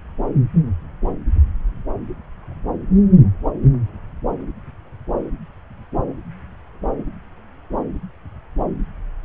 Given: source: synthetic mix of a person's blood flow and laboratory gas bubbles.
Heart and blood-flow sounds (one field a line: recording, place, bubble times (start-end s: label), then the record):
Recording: Doppler ultrasound of blood flow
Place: subclavian vein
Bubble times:
no bubbles
From the record:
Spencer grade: 0 (complete lack of bubble signals)